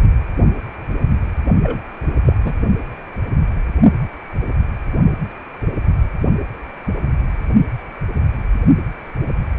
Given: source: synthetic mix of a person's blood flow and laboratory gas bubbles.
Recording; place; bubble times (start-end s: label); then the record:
Doppler ultrasound of blood flow; precordium
1.62-1.81 s: bubbles
2.25-2.33 s: bubbles
2.45-2.54 s: bubbles
From the record:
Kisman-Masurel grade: 213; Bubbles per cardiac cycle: several, 3 to 8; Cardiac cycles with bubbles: 1 to 10%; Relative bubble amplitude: loud (0.450 to 0.775); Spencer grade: 1 (occasional bubble signal discernible with the cardiac motion signal, with majority of cardiac periods free of bubbles); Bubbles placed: only in the low amplitude regions of the cardiac cycle